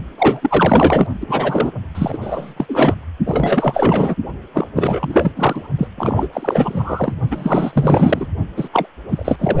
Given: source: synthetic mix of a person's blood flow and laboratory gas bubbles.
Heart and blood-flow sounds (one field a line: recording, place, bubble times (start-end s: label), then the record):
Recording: Doppler ultrasound of blood flow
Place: precordium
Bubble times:
0.18-1.06 s: bubbles
1.20-1.71 s: bubbles
1.94-2.18 s: bubbles
2.21-2.65 s: bubbles
2.68-2.95 s: bubbles
3.25-4.15 s: bubbles
4.54-4.68 s: bubbles
4.75-5.32 s: bubbles
5.36-5.69 s: bubbles
5.78-5.88 s: bubbles
5.97-6.28 s: bubbles
6.33-7.17 s: bubbles
7.29-8.28 s: bubbles
8.56-8.68 s: bubbles
8.72-8.86 s: bubbles
9.10-9.60 s: bubbles
From the record:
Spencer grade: 4 (maximum detectable bubble signal sounding continuously throughout systole and diastole of every cardiac period, and overriding the amplitude of the normal cardiac signals)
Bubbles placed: only in the low amplitude regions of the cardiac cycle